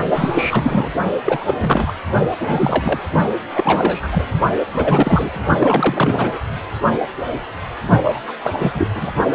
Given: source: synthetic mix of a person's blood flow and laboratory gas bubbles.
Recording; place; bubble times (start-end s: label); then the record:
Doppler ultrasound of blood flow; precordium
0.14-0.91 s: bubbles
1.24-1.55 s: bubbles
1.60-1.92 s: bubbles
2.39-3.00 s: bubbles
3.56-4.09 s: bubbles
4.12-4.27 s: bubbles
4.73-5.42 s: bubbles
5.60-6.39 s: bubbles
8.04-8.20 s: bubbles
8.27-8.32 s: bubbles
8.43-8.88 s: bubbles
8.95-9.12 s: bubbles
From the record:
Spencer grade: 3 (all of the cardiac periods contain showers or single bubble signals, but not dominating or overriding the cardiac motion signals); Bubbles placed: only in the low amplitude regions of the cardiac cycle